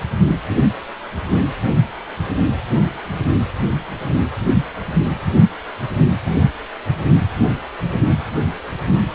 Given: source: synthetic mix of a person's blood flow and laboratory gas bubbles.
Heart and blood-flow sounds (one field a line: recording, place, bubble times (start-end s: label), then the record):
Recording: Doppler ultrasound of blood flow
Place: precordium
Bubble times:
no bubbles
From the record:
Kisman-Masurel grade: 000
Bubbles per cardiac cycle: 0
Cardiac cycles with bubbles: 0%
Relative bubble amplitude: no bubbles discernible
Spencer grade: 0 (complete lack of bubble signals)